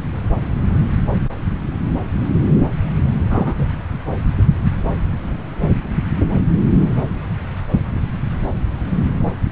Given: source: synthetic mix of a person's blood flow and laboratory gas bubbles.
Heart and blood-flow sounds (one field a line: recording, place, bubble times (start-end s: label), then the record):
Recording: Doppler ultrasound of blood flow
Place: subclavian vein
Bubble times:
3.30-3.54 s: bubbles
3.58-3.66 s: bubbles
From the record:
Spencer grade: 1 (occasional bubble signal discernible with the cardiac motion signal, with majority of cardiac periods free of bubbles)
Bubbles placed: anywhere in the cardiac cycle